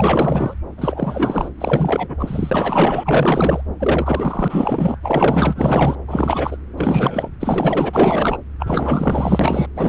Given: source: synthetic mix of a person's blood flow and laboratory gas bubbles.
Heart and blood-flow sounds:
Doppler ultrasound of blood flow; subclavian vein
0.00-0.54 s: bubbles
0.78-1.50 s: bubbles
1.58-3.63 s: bubbles
3.79-4.96 s: bubbles
5.02-5.96 s: bubbles
6.07-6.57 s: bubbles
6.77-7.29 s: bubbles
7.40-8.38 s: bubbles
8.60-9.67 s: bubbles
9.75-9.89 s: bubbles
From the record:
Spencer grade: 4 (maximum detectable bubble signal sounding continuously throughout systole and diastole of every cardiac period, and overriding the amplitude of the normal cardiac signals); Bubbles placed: anywhere in the cardiac cycle

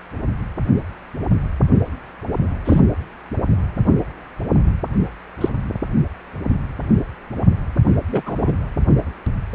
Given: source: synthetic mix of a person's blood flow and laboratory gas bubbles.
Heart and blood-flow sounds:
Doppler ultrasound of blood flow; precordium
2.65-2.81 s: bubbles
5.41-5.49 s: bubbles
8.12-8.22 s: bubbles
8.26-8.52 s: bubbles
From the record:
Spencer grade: 2 (many but less than half of the cardiac periods contain bubble signals, singularly or in groups); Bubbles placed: anywhere in the cardiac cycle

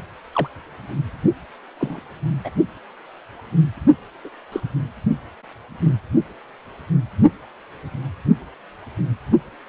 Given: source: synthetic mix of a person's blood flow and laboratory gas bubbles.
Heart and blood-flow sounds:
Doppler ultrasound of blood flow; precordium
0.33-0.48 s: bubbles
1.79-2.00 s: bubbles
2.44-2.50 s: bubbles
4.24-4.29 s: bubbles
4.52-4.61 s: bubbles
From the record:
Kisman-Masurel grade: 122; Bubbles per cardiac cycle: 1 to 2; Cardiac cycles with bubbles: 10 to 50%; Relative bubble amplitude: moderate (0.250 to 0.450); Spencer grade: 2 (many but less than half of the cardiac periods contain bubble signals, singularly or in groups); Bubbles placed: only in the low amplitude regions of the cardiac cycle

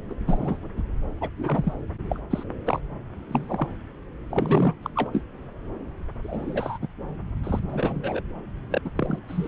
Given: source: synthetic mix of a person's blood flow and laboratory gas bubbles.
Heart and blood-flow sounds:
Doppler ultrasound of blood flow; subclavian vein
0.09-0.14 s: bubbles
0.27-0.59 s: bubbles
0.77-0.82 s: bubbles
1.21-1.29 s: bubbles
1.36-1.72 s: bubbles
2.09-2.19 s: bubbles
2.30-2.43 s: bubbles
2.65-2.80 s: bubbles
3.28-3.68 s: bubbles
4.29-4.73 s: bubbles
4.83-4.90 s: bubbles
4.96-5.21 s: bubbles
6.22-6.78 s: bubbles
6.81-6.88 s: bubbles
7.43-7.59 s: bubbles
7.69-8.21 s: bubbles
8.70-8.82 s: bubbles
8.85-8.91 s: bubbles
8.96-9.19 s: bubbles
9.28-9.48 s: bubbles
From the record:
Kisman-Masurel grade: 242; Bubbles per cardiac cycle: several, 3 to 8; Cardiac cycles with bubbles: 100%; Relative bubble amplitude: moderate (0.250 to 0.450); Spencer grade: 3 (all of the cardiac periods contain showers or single bubble signals, but not dominating or overriding the cardiac motion signals); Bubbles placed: anywhere in the cardiac cycle

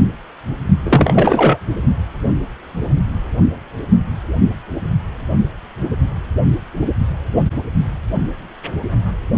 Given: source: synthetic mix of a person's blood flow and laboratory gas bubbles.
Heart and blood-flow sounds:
Doppler ultrasound of blood flow; precordium
0.85-1.58 s: bubbles
From the record:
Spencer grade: 1 (occasional bubble signal discernible with the cardiac motion signal, with majority of cardiac periods free of bubbles); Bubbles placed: only in the low amplitude regions of the cardiac cycle

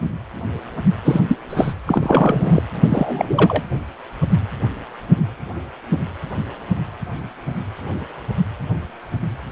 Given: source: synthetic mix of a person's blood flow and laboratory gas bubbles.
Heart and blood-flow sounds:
Doppler ultrasound of blood flow; precordium
1.04-1.21 s: bubbles
1.28-1.38 s: bubbles
1.50-1.74 s: bubbles
1.86-2.63 s: bubbles
2.80-3.63 s: bubbles
From the record:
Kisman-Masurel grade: 223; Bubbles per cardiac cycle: several, 3 to 8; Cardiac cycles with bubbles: 10 to 50%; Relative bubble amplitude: loud (0.450 to 0.775); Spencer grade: 2 (many but less than half of the cardiac periods contain bubble signals, singularly or in groups); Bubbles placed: anywhere in the cardiac cycle

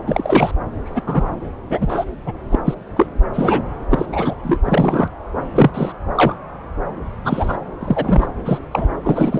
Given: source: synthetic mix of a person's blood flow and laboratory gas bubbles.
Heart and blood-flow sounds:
Doppler ultrasound of blood flow; subclavian vein
0.07-0.52 s: bubbles
0.85-1.33 s: bubbles
1.70-2.06 s: bubbles
2.26-2.33 s: bubbles
2.50-2.56 s: bubbles
2.65-2.75 s: bubbles
2.96-3.06 s: bubbles
3.33-3.61 s: bubbles
3.90-4.05 s: bubbles
4.12-4.34 s: bubbles
4.43-4.58 s: bubbles
4.65-5.10 s: bubbles
5.55-5.71 s: bubbles
5.74-5.92 s: bubbles
6.15-6.36 s: bubbles
7.24-7.57 s: bubbles
7.80-8.27 s: bubbles
8.45-8.59 s: bubbles
8.71-8.88 s: bubbles
9.03-9.40 s: bubbles
From the record:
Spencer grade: 3 (all of the cardiac periods contain showers or single bubble signals, but not dominating or overriding the cardiac motion signals); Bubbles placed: anywhere in the cardiac cycle

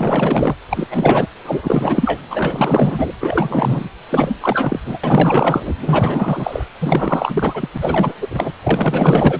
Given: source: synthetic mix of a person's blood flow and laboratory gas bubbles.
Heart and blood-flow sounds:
Doppler ultrasound of blood flow; precordium
0.00-0.55 s: bubbles
0.69-1.27 s: bubbles
1.45-2.21 s: bubbles
2.30-3.12 s: bubbles
3.21-3.89 s: bubbles
4.06-4.35 s: bubbles
4.41-4.80 s: bubbles
4.85-4.98 s: bubbles
5.04-5.75 s: bubbles
5.81-6.64 s: bubbles
6.81-7.68 s: bubbles
7.73-7.78 s: bubbles
7.80-8.14 s: bubbles
8.21-8.53 s: bubbles
8.63-9.40 s: bubbles
From the record:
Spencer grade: 4 (maximum detectable bubble signal sounding continuously throughout systole and diastole of every cardiac period, and overriding the amplitude of the normal cardiac signals); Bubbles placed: anywhere in the cardiac cycle

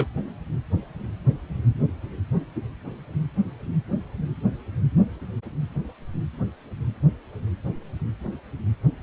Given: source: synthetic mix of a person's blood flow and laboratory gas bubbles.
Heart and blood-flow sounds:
Doppler ultrasound of blood flow; precordium
0.00-0.07 s: bubbles
From the record:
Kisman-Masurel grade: 111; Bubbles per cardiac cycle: 1 to 2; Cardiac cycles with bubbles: 1 to 10%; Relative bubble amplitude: barely perceptible (0.100 to 0.250); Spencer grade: 1 (occasional bubble signal discernible with the cardiac motion signal, with majority of cardiac periods free of bubbles); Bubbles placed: anywhere in the cardiac cycle

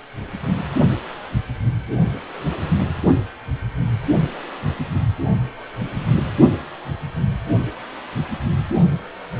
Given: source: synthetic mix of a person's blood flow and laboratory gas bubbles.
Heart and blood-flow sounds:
Doppler ultrasound of blood flow; precordium
no bubbles
From the record:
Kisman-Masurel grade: 000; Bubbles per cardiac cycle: 0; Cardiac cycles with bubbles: 0%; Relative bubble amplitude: no bubbles discernible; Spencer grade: 0 (complete lack of bubble signals)

